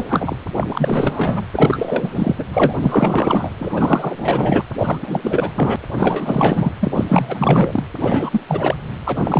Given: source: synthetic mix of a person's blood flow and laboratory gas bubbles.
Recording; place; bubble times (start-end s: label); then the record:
Doppler ultrasound of blood flow; precordium
0.00-0.35 s: bubbles
0.56-1.46 s: bubbles
1.52-2.44 s: bubbles
2.52-2.73 s: bubbles
2.79-3.51 s: bubbles
3.58-4.63 s: bubbles
4.78-4.99 s: bubbles
5.01-5.20 s: bubbles
5.24-5.51 s: bubbles
5.55-5.76 s: bubbles
5.97-6.73 s: bubbles
6.80-7.83 s: bubbles
8.00-8.41 s: bubbles
8.48-8.75 s: bubbles
9.04-9.40 s: bubbles
From the record:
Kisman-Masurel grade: 444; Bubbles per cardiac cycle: continuous sound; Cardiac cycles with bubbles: 100%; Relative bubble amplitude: maximal (0.775 to 0.999); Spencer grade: 4 (maximum detectable bubble signal sounding continuously throughout systole and diastole of every cardiac period, and overriding the amplitude of the normal cardiac signals); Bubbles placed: anywhere in the cardiac cycle